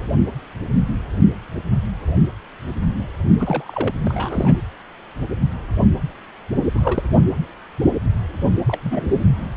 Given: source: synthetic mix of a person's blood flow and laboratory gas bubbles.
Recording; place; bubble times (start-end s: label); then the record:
Doppler ultrasound of blood flow; precordium
3.40-3.92 s: bubbles
4.04-4.58 s: bubbles
6.75-7.03 s: bubbles
8.66-8.79 s: bubbles
8.82-9.10 s: bubbles
From the record:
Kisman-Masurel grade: 221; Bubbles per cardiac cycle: several, 3 to 8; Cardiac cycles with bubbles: 10 to 50%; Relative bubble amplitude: barely perceptible (0.100 to 0.250); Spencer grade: 2 (many but less than half of the cardiac periods contain bubble signals, singularly or in groups); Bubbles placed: anywhere in the cardiac cycle